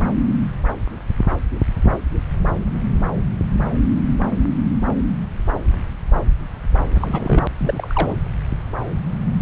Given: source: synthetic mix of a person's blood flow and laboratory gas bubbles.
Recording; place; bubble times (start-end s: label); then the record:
Doppler ultrasound of blood flow; subclavian vein
6.92-7.45 s: bubbles
7.57-8.15 s: bubbles
From the record:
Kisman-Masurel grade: 212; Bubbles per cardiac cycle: several, 3 to 8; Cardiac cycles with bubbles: 1 to 10%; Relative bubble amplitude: moderate (0.250 to 0.450); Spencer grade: 1 (occasional bubble signal discernible with the cardiac motion signal, with majority of cardiac periods free of bubbles); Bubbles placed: anywhere in the cardiac cycle